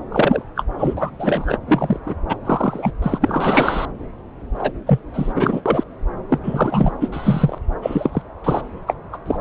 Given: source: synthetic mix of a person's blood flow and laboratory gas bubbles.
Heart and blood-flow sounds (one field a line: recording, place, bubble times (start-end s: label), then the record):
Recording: Doppler ultrasound of blood flow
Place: subclavian vein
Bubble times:
0.11-0.42 s: bubbles
0.55-0.65 s: bubbles
0.78-0.95 s: bubbles
0.97-1.10 s: bubbles
1.19-1.58 s: bubbles
1.67-1.99 s: bubbles
2.06-2.16 s: bubbles
2.29-2.37 s: bubbles
2.45-2.92 s: bubbles
3.02-3.86 s: bubbles
4.54-4.71 s: bubbles
4.86-5.00 s: bubbles
5.13-5.62 s: bubbles
5.66-5.83 s: bubbles
6.29-6.38 s: bubbles
6.43-6.93 s: bubbles
7.00-7.08 s: bubbles
7.12-7.58 s: bubbles
7.82-8.22 s: bubbles
8.44-8.61 s: bubbles
8.86-8.94 s: bubbles
9.12-9.17 s: bubbles
9.25-9.37 s: bubbles
From the record:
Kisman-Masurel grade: 233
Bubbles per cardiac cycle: several, 3 to 8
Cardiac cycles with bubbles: 50 to 99%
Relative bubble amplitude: loud (0.450 to 0.775)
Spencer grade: 3 (all of the cardiac periods contain showers or single bubble signals, but not dominating or overriding the cardiac motion signals)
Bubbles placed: anywhere in the cardiac cycle